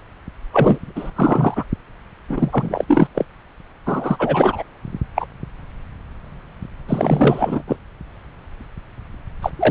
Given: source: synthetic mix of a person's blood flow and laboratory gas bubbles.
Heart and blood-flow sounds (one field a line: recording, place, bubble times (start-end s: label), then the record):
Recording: Doppler ultrasound of blood flow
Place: subclavian vein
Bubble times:
0.52-1.10 s: bubbles
1.15-1.65 s: bubbles
2.28-2.84 s: bubbles
2.88-3.07 s: bubbles
3.15-3.25 s: bubbles
3.85-4.63 s: bubbles
5.16-5.25 s: bubbles
6.88-7.62 s: bubbles
7.67-7.77 s: bubbles
9.42-9.51 s: bubbles
9.59-9.71 s: bubbles
From the record:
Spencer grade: 3 (all of the cardiac periods contain showers or single bubble signals, but not dominating or overriding the cardiac motion signals)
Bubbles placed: anywhere in the cardiac cycle